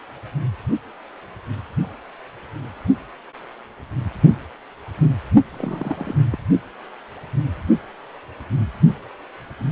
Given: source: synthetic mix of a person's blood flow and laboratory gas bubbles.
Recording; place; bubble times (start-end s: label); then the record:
Doppler ultrasound of blood flow; precordium
5.52-6.15 s: bubbles
6.30-6.38 s: bubbles
From the record:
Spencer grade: 1 (occasional bubble signal discernible with the cardiac motion signal, with majority of cardiac periods free of bubbles); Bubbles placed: only in the low amplitude regions of the cardiac cycle